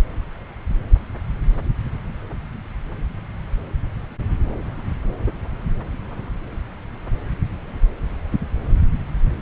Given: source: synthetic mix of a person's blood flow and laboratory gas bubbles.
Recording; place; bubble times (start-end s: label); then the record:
Doppler ultrasound of blood flow; subclavian vein
no bubbles
From the record:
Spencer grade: 0 (complete lack of bubble signals)